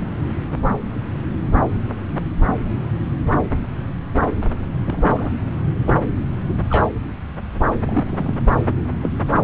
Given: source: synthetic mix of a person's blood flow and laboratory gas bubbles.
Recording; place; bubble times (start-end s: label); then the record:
Doppler ultrasound of blood flow; subclavian vein
4.84-5.32 s: bubbles
5.87-5.96 s: bubbles
6.70-6.90 s: bubbles
7.80-8.34 s: bubbles
9.01-9.09 s: bubbles
From the record:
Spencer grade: 2 (many but less than half of the cardiac periods contain bubble signals, singularly or in groups); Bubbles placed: anywhere in the cardiac cycle